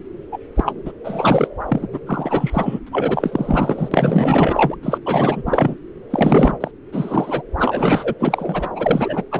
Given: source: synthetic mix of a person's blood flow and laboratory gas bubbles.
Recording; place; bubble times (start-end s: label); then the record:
Doppler ultrasound of blood flow; subclavian vein
0.31-0.39 s: bubbles
0.55-0.72 s: bubbles
0.85-0.92 s: bubbles
1.04-1.48 s: bubbles
1.69-1.88 s: bubbles
1.92-2.00 s: bubbles
2.06-2.80 s: bubbles
2.86-4.76 s: bubbles
4.83-4.99 s: bubbles
5.05-5.43 s: bubbles
5.46-5.75 s: bubbles
6.10-6.58 s: bubbles
6.60-6.71 s: bubbles
6.92-7.42 s: bubbles
7.57-8.14 s: bubbles
8.19-8.69 s: bubbles
8.74-9.24 s: bubbles
9.31-9.40 s: bubbles
From the record:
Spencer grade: 4 (maximum detectable bubble signal sounding continuously throughout systole and diastole of every cardiac period, and overriding the amplitude of the normal cardiac signals); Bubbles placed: anywhere in the cardiac cycle